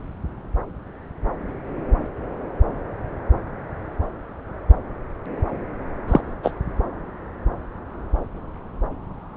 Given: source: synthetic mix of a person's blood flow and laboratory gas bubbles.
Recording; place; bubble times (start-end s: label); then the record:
Doppler ultrasound of blood flow; subclavian vein
6.08-6.21 s: bubbles
6.43-6.51 s: bubbles
From the record:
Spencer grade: 1 (occasional bubble signal discernible with the cardiac motion signal, with majority of cardiac periods free of bubbles); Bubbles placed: anywhere in the cardiac cycle